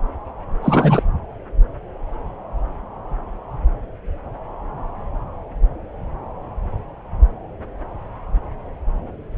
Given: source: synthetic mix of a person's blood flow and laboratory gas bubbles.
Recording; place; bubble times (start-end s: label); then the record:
Doppler ultrasound of blood flow; subclavian vein
0.62-1.02 s: bubbles
From the record:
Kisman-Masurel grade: 212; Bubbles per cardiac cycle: several, 3 to 8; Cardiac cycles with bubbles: 1 to 10%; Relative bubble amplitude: moderate (0.250 to 0.450); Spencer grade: 1 (occasional bubble signal discernible with the cardiac motion signal, with majority of cardiac periods free of bubbles); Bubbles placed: anywhere in the cardiac cycle